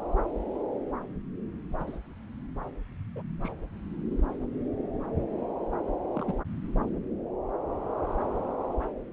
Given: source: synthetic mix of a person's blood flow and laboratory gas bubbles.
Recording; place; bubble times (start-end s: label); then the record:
Doppler ultrasound of blood flow; subclavian vein
1.78-1.98 s: bubbles
3.15-3.23 s: bubbles
3.41-3.51 s: bubbles
6.14-6.24 s: bubbles
6.27-6.34 s: bubbles
From the record:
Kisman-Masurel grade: 121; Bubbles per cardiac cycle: 1 to 2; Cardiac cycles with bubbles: 10 to 50%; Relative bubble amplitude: barely perceptible (0.100 to 0.250); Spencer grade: 2 (many but less than half of the cardiac periods contain bubble signals, singularly or in groups); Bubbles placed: anywhere in the cardiac cycle